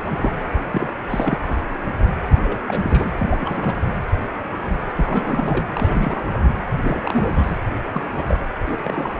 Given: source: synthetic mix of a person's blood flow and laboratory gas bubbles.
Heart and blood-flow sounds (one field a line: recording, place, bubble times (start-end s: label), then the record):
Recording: Doppler ultrasound of blood flow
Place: precordium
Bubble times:
0.00-0.33 s: bubbles
0.71-0.90 s: bubbles
1.09-1.36 s: bubbles
2.44-2.58 s: bubbles
2.68-3.08 s: bubbles
3.19-3.78 s: bubbles
4.94-5.66 s: bubbles
5.73-6.21 s: bubbles
6.33-6.38 s: bubbles
6.81-7.59 s: bubbles
7.92-8.02 s: bubbles
8.18-8.24 s: bubbles
8.29-8.40 s: bubbles
8.66-9.10 s: bubbles
From the record:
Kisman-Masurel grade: 332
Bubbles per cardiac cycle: rolling drumbeat, 9 or more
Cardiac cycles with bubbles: 50 to 99%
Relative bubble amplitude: moderate (0.250 to 0.450)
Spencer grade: 3 (all of the cardiac periods contain showers or single bubble signals, but not dominating or overriding the cardiac motion signals)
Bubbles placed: anywhere in the cardiac cycle